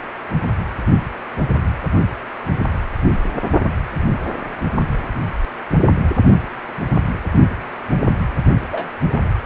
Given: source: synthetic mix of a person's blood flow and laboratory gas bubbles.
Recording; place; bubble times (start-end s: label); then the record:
Doppler ultrasound of blood flow; precordium
8.72-8.89 s: bubbles
9.12-9.23 s: bubbles
From the record:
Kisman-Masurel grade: 112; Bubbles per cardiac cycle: 1 to 2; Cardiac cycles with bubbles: 1 to 10%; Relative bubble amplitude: moderate (0.250 to 0.450); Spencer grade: 1 (occasional bubble signal discernible with the cardiac motion signal, with majority of cardiac periods free of bubbles); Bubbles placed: anywhere in the cardiac cycle